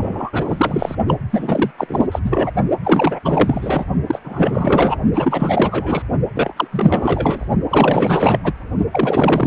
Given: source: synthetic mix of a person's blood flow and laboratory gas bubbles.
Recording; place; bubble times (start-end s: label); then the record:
Doppler ultrasound of blood flow; precordium
0.00-0.95 s: bubbles
1.07-1.19 s: bubbles
1.30-1.71 s: bubbles
1.77-2.07 s: bubbles
2.12-2.19 s: bubbles
2.23-2.51 s: bubbles
2.83-3.19 s: bubbles
3.24-3.85 s: bubbles
4.06-4.19 s: bubbles
4.24-4.99 s: bubbles
5.14-6.02 s: bubbles
6.35-6.52 s: bubbles
6.56-6.68 s: bubbles
6.72-7.47 s: bubbles
7.69-8.39 s: bubbles
8.43-8.53 s: bubbles
8.91-9.47 s: bubbles
From the record:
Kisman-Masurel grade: 444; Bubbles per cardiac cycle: continuous sound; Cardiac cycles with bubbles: 100%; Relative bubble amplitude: maximal (0.775 to 0.999); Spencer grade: 4 (maximum detectable bubble signal sounding continuously throughout systole and diastole of every cardiac period, and overriding the amplitude of the normal cardiac signals); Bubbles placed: only in the low amplitude regions of the cardiac cycle